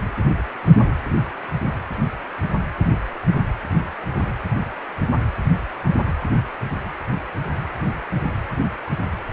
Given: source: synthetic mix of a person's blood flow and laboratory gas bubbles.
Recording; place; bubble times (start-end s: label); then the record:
Doppler ultrasound of blood flow; precordium
no bubbles
From the record:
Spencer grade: 0 (complete lack of bubble signals)